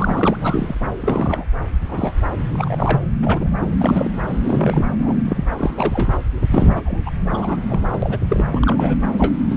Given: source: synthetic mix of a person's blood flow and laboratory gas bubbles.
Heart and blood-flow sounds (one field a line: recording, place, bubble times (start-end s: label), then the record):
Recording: Doppler ultrasound of blood flow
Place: subclavian vein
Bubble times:
0.00-0.37 s: bubbles
0.41-0.78 s: bubbles
0.81-0.91 s: bubbles
1.00-1.45 s: bubbles
1.88-2.12 s: bubbles
2.54-3.02 s: bubbles
3.13-3.48 s: bubbles
3.52-3.69 s: bubbles
3.80-4.11 s: bubbles
4.28-4.85 s: bubbles
4.98-5.43 s: bubbles
5.57-6.09 s: bubbles
6.47-6.82 s: bubbles
6.85-7.00 s: bubbles
7.05-7.10 s: bubbles
7.32-7.56 s: bubbles
7.69-7.79 s: bubbles
7.92-8.18 s: bubbles
8.28-8.46 s: bubbles
8.52-8.96 s: bubbles
9.17-9.35 s: bubbles
9.51-9.57 s: bubbles
From the record:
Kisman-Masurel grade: 232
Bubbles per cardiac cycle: several, 3 to 8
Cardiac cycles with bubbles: 50 to 99%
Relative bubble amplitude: moderate (0.250 to 0.450)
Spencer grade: 3 (all of the cardiac periods contain showers or single bubble signals, but not dominating or overriding the cardiac motion signals)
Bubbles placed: anywhere in the cardiac cycle